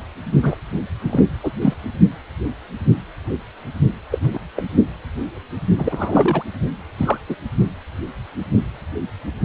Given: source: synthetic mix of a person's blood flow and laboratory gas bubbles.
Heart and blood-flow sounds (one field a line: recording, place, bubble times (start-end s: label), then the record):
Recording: Doppler ultrasound of blood flow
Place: precordium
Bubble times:
0.42-0.56 s: bubbles
0.72-0.80 s: bubbles
1.02-1.24 s: bubbles
1.43-1.50 s: bubbles
1.61-1.74 s: bubbles
4.11-4.19 s: bubbles
4.22-4.40 s: bubbles
4.56-4.63 s: bubbles
5.77-6.43 s: bubbles
6.98-7.18 s: bubbles
7.29-7.36 s: bubbles
From the record:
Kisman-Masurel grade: 222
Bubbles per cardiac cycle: several, 3 to 8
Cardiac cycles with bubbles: 10 to 50%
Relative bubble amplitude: moderate (0.250 to 0.450)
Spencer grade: 2 (many but less than half of the cardiac periods contain bubble signals, singularly or in groups)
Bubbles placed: only in the low amplitude regions of the cardiac cycle